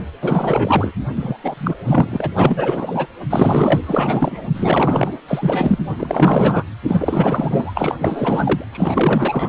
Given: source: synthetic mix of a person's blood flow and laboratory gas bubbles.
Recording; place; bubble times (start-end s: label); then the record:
Doppler ultrasound of blood flow; precordium
0.21-0.92 s: bubbles
1.16-1.36 s: bubbles
1.44-2.30 s: bubbles
2.36-3.07 s: bubbles
3.30-4.47 s: bubbles
4.54-5.19 s: bubbles
5.27-5.79 s: bubbles
5.98-6.63 s: bubbles
6.88-7.95 s: bubbles
8.00-8.64 s: bubbles
8.72-9.49 s: bubbles
From the record:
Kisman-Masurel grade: 444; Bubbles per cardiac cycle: continuous sound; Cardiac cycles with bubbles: 100%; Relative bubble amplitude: maximal (0.775 to 0.999); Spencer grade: 4 (maximum detectable bubble signal sounding continuously throughout systole and diastole of every cardiac period, and overriding the amplitude of the normal cardiac signals); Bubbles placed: anywhere in the cardiac cycle